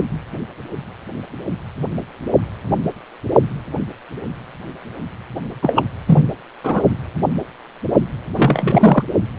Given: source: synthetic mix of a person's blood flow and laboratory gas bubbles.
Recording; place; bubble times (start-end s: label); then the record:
Doppler ultrasound of blood flow; precordium
5.62-5.87 s: bubbles
6.06-6.32 s: bubbles
6.63-6.82 s: bubbles
8.34-9.04 s: bubbles
From the record:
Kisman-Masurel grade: 223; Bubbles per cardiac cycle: several, 3 to 8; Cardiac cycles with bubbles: 10 to 50%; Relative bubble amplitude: loud (0.450 to 0.775); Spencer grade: 2 (many but less than half of the cardiac periods contain bubble signals, singularly or in groups); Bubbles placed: anywhere in the cardiac cycle